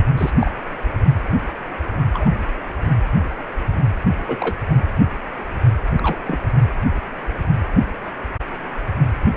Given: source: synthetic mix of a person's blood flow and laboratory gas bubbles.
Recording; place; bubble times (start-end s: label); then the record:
Doppler ultrasound of blood flow; precordium
0.17-0.31 s: bubbles
0.39-0.51 s: bubbles
2.14-2.31 s: bubbles
4.26-4.38 s: bubbles
4.41-4.55 s: bubbles
5.99-6.18 s: bubbles
6.25-6.40 s: bubbles
From the record:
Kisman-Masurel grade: 122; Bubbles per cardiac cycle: 1 to 2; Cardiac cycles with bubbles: 10 to 50%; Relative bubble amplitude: moderate (0.250 to 0.450); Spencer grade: 2 (many but less than half of the cardiac periods contain bubble signals, singularly or in groups); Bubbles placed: anywhere in the cardiac cycle